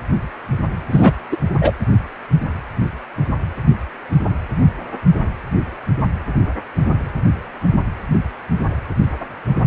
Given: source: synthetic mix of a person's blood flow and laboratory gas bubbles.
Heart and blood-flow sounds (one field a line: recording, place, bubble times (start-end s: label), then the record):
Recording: Doppler ultrasound of blood flow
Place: precordium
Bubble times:
0.92-1.12 s: bubbles
1.31-1.37 s: bubbles
1.61-1.73 s: bubbles
From the record:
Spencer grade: 1 (occasional bubble signal discernible with the cardiac motion signal, with majority of cardiac periods free of bubbles)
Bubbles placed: anywhere in the cardiac cycle